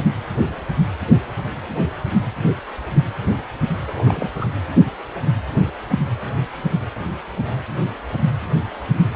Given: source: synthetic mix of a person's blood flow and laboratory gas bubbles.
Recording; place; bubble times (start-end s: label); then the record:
Doppler ultrasound of blood flow; precordium
3.87-4.29 s: bubbles
4.37-4.46 s: bubbles
From the record:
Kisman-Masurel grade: 212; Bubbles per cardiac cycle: several, 3 to 8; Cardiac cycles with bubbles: 1 to 10%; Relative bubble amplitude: moderate (0.250 to 0.450); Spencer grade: 1 (occasional bubble signal discernible with the cardiac motion signal, with majority of cardiac periods free of bubbles); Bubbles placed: anywhere in the cardiac cycle